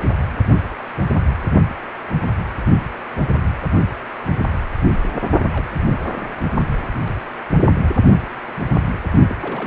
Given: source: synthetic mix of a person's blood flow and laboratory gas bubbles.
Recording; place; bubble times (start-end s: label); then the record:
Doppler ultrasound of blood flow; precordium
5.51-5.71 s: bubbles
5.85-5.97 s: bubbles
6.04-6.29 s: bubbles
9.29-9.35 s: bubbles
9.42-9.67 s: bubbles
From the record:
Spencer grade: 2 (many but less than half of the cardiac periods contain bubble signals, singularly or in groups); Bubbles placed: only in the low amplitude regions of the cardiac cycle